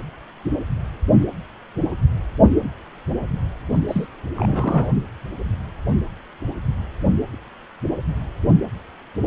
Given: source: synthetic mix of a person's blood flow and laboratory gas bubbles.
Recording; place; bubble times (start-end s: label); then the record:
Doppler ultrasound of blood flow; precordium
3.88-4.06 s: bubbles
4.37-4.88 s: bubbles
From the record:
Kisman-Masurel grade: 212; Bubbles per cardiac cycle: several, 3 to 8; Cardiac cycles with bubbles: 1 to 10%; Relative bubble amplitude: moderate (0.250 to 0.450); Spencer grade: 1 (occasional bubble signal discernible with the cardiac motion signal, with majority of cardiac periods free of bubbles); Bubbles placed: only in the low amplitude regions of the cardiac cycle